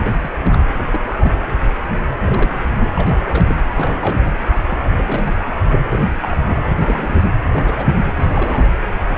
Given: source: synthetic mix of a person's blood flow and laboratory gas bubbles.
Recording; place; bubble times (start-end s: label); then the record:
Doppler ultrasound of blood flow; precordium
0.06-0.38 s: bubbles
0.44-0.63 s: bubbles
0.72-1.33 s: bubbles
1.80-1.85 s: bubbles
2.19-2.61 s: bubbles
2.79-2.89 s: bubbles
2.96-3.55 s: bubbles
3.75-4.15 s: bubbles
4.21-4.30 s: bubbles
4.69-4.78 s: bubbles
4.98-5.37 s: bubbles
5.45-5.53 s: bubbles
5.71-5.80 s: bubbles
5.89-6.03 s: bubbles
6.21-6.41 s: bubbles
6.44-6.63 s: bubbles
6.67-6.72 s: bubbles
6.80-7.28 s: bubbles
7.44-8.67 s: bubbles
9.07-9.18 s: bubbles
From the record:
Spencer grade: 3 (all of the cardiac periods contain showers or single bubble signals, but not dominating or overriding the cardiac motion signals); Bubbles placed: anywhere in the cardiac cycle